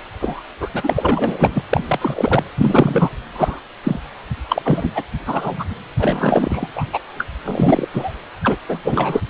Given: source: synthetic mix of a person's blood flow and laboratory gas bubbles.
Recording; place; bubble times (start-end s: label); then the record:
Doppler ultrasound of blood flow; precordium
0.20-0.42 s: bubbles
0.60-0.70 s: bubbles
0.74-1.63 s: bubbles
1.70-1.84 s: bubbles
1.88-2.45 s: bubbles
2.58-3.09 s: bubbles
3.33-3.60 s: bubbles
3.83-4.00 s: bubbles
4.49-4.90 s: bubbles
4.94-5.04 s: bubbles
5.26-5.64 s: bubbles
5.98-6.67 s: bubbles
6.75-6.85 s: bubbles
6.93-6.99 s: bubbles
7.18-7.27 s: bubbles
7.44-7.87 s: bubbles
7.92-8.18 s: bubbles
8.42-8.56 s: bubbles
8.69-8.79 s: bubbles
8.83-9.21 s: bubbles
From the record:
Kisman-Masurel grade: 243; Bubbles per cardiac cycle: several, 3 to 8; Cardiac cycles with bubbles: 100%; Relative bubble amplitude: loud (0.450 to 0.775); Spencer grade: 3 (all of the cardiac periods contain showers or single bubble signals, but not dominating or overriding the cardiac motion signals); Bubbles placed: anywhere in the cardiac cycle